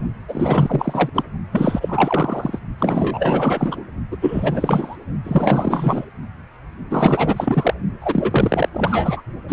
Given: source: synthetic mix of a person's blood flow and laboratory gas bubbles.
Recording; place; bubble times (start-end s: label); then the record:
Doppler ultrasound of blood flow; precordium
0.28-1.09 s: bubbles
1.15-1.24 s: bubbles
1.52-2.59 s: bubbles
2.78-3.83 s: bubbles
4.11-4.17 s: bubbles
4.21-4.97 s: bubbles
5.24-6.06 s: bubbles
6.90-7.74 s: bubbles
8.01-8.69 s: bubbles
8.73-9.22 s: bubbles
9.48-9.53 s: bubbles
From the record:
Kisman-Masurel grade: 444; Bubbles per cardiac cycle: continuous sound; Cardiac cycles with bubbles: 100%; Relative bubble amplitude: maximal (0.775 to 0.999); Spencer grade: 4 (maximum detectable bubble signal sounding continuously throughout systole and diastole of every cardiac period, and overriding the amplitude of the normal cardiac signals); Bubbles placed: only in the low amplitude regions of the cardiac cycle